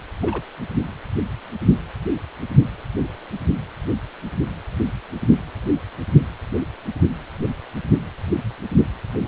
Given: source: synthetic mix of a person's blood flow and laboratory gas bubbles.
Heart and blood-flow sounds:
Doppler ultrasound of blood flow; precordium
0.21-0.42 s: bubbles
From the record:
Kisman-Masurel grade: 111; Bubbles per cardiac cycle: 1 to 2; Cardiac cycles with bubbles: 1 to 10%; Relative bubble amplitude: barely perceptible (0.100 to 0.250); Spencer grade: 1 (occasional bubble signal discernible with the cardiac motion signal, with majority of cardiac periods free of bubbles); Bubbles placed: anywhere in the cardiac cycle

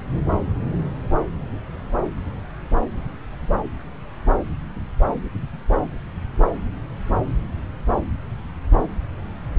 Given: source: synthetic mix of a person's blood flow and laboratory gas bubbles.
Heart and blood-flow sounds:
Doppler ultrasound of blood flow; subclavian vein
no bubbles
From the record:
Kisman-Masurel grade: 000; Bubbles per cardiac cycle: 0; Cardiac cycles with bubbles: 0%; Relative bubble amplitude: no bubbles discernible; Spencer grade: 0 (complete lack of bubble signals)

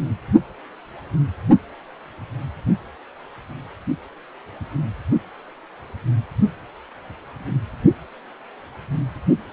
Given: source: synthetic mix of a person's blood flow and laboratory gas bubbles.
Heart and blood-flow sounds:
Doppler ultrasound of blood flow; precordium
no bubbles
From the record:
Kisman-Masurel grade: 000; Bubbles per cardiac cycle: 0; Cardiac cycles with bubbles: 0%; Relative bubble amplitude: no bubbles discernible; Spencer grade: 0 (complete lack of bubble signals)

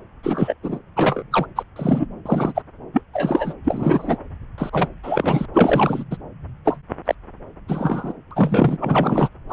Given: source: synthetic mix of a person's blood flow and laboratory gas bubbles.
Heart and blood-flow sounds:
Doppler ultrasound of blood flow; subclavian vein
0.23-0.54 s: bubbles
0.63-0.79 s: bubbles
0.96-1.23 s: bubbles
1.31-1.46 s: bubbles
1.55-1.63 s: bubbles
1.76-2.06 s: bubbles
2.25-2.62 s: bubbles
2.92-3.02 s: bubbles
3.13-3.54 s: bubbles
3.64-4.17 s: bubbles
4.58-4.90 s: bubbles
5.03-5.46 s: bubbles
5.53-6.04 s: bubbles
6.11-6.17 s: bubbles
6.65-6.78 s: bubbles
7.05-7.15 s: bubbles
7.68-8.13 s: bubbles
8.30-8.77 s: bubbles
8.80-9.28 s: bubbles
9.49-9.53 s: bubbles
From the record:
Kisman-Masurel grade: 243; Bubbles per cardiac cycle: several, 3 to 8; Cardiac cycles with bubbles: 100%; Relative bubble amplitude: loud (0.450 to 0.775); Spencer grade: 3 (all of the cardiac periods contain showers or single bubble signals, but not dominating or overriding the cardiac motion signals); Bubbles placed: anywhere in the cardiac cycle

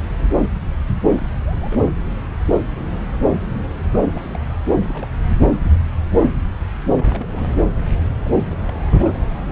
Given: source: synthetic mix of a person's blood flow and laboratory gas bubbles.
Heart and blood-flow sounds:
Doppler ultrasound of blood flow; subclavian vein
1.18-1.26 s: bubbles
1.30-1.84 s: bubbles
1.87-1.91 s: bubbles
3.92-4.05 s: bubbles
4.12-4.39 s: bubbles
4.44-4.53 s: bubbles
4.67-5.08 s: bubbles
6.96-7.26 s: bubbles
7.29-7.47 s: bubbles
7.99-8.04 s: bubbles
8.24-8.32 s: bubbles
8.50-8.80 s: bubbles
8.84-9.18 s: bubbles
From the record:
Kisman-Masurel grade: 221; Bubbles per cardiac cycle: several, 3 to 8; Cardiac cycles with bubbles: 10 to 50%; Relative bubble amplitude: barely perceptible (0.100 to 0.250); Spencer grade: 2 (many but less than half of the cardiac periods contain bubble signals, singularly or in groups); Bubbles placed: anywhere in the cardiac cycle

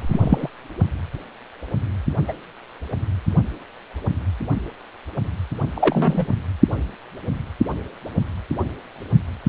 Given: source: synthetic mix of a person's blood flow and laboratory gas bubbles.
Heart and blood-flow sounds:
Doppler ultrasound of blood flow; precordium
0.01-0.51 s: bubbles
2.28-2.33 s: bubbles
5.75-6.26 s: bubbles
9.46-9.49 s: bubbles
From the record:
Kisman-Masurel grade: 123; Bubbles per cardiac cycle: 1 to 2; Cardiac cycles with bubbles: 10 to 50%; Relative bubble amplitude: loud (0.450 to 0.775); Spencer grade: 2 (many but less than half of the cardiac periods contain bubble signals, singularly or in groups); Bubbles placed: only in the low amplitude regions of the cardiac cycle

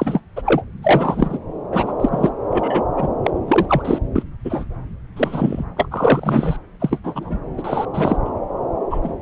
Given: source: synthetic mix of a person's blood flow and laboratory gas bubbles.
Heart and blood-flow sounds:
Doppler ultrasound of blood flow; subclavian vein
0.00-0.20 s: bubbles
0.36-0.42 s: bubbles
0.46-0.62 s: bubbles
0.83-1.39 s: bubbles
1.71-1.93 s: bubbles
2.00-2.29 s: bubbles
2.50-2.83 s: bubbles
2.96-3.08 s: bubbles
3.23-3.31 s: bubbles
3.48-3.66 s: bubbles
3.68-3.99 s: bubbles
4.16-4.23 s: bubbles
4.45-4.65 s: bubbles
5.16-5.64 s: bubbles
5.76-5.88 s: bubbles
5.91-6.57 s: bubbles
6.80-6.99 s: bubbles
7.04-7.38 s: bubbles
7.58-7.85 s: bubbles
7.94-8.17 s: bubbles
8.24-8.30 s: bubbles
8.90-8.98 s: bubbles
9.03-9.11 s: bubbles
From the record:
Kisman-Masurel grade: 243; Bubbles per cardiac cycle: several, 3 to 8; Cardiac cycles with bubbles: 100%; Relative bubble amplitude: loud (0.450 to 0.775); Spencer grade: 3 (all of the cardiac periods contain showers or single bubble signals, but not dominating or overriding the cardiac motion signals); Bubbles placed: anywhere in the cardiac cycle

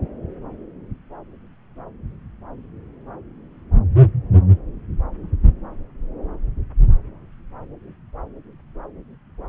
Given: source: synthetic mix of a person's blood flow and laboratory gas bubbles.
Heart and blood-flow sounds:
Doppler ultrasound of blood flow; subclavian vein
no bubbles
From the record:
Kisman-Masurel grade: 000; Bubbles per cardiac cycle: 0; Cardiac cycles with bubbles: 0%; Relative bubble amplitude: no bubbles discernible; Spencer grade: 0 (complete lack of bubble signals)

